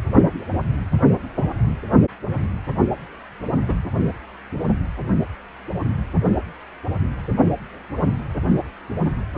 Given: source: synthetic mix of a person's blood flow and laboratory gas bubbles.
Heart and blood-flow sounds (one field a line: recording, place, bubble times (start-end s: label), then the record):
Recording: Doppler ultrasound of blood flow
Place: precordium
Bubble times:
3.67-3.74 s: bubbles
From the record:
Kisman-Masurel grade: 112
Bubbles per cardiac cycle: 1 to 2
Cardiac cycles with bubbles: 1 to 10%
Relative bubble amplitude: moderate (0.250 to 0.450)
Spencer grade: 1 (occasional bubble signal discernible with the cardiac motion signal, with majority of cardiac periods free of bubbles)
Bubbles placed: anywhere in the cardiac cycle